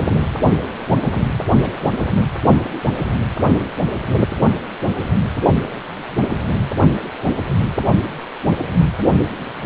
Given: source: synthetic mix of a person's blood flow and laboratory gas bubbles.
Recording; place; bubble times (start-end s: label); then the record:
Doppler ultrasound of blood flow; precordium
1.38-1.45 s: bubbles
1.61-1.72 s: bubbles
From the record:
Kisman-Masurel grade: 111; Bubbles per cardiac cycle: 1 to 2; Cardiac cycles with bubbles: 1 to 10%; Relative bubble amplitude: barely perceptible (0.100 to 0.250); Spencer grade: 1 (occasional bubble signal discernible with the cardiac motion signal, with majority of cardiac periods free of bubbles); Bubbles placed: anywhere in the cardiac cycle